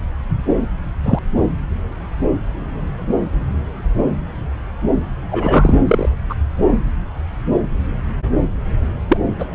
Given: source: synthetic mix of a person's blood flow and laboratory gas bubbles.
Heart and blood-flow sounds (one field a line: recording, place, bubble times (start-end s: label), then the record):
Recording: Doppler ultrasound of blood flow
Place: subclavian vein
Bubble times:
1.05-1.19 s: bubbles
5.31-5.74 s: bubbles
5.88-6.09 s: bubbles
6.29-6.34 s: bubbles
9.08-9.17 s: bubbles
9.39-9.45 s: bubbles
From the record:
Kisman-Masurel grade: 123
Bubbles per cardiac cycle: 1 to 2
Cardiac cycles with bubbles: 10 to 50%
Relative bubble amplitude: loud (0.450 to 0.775)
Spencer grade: 2 (many but less than half of the cardiac periods contain bubble signals, singularly or in groups)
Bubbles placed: anywhere in the cardiac cycle